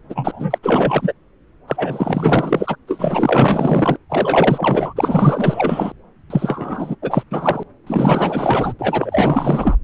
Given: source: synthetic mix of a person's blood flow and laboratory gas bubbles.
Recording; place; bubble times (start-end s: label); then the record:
Doppler ultrasound of blood flow; subclavian vein
0.10-0.58 s: bubbles
0.62-1.12 s: bubbles
1.68-2.75 s: bubbles
2.87-3.98 s: bubbles
4.09-4.93 s: bubbles
4.96-5.92 s: bubbles
6.30-6.96 s: bubbles
7.02-7.23 s: bubbles
7.30-7.63 s: bubbles
7.87-8.73 s: bubbles
8.79-9.75 s: bubbles
From the record:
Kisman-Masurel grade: 444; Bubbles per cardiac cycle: continuous sound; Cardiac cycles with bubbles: 100%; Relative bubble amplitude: maximal (0.775 to 0.999); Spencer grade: 4 (maximum detectable bubble signal sounding continuously throughout systole and diastole of every cardiac period, and overriding the amplitude of the normal cardiac signals); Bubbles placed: anywhere in the cardiac cycle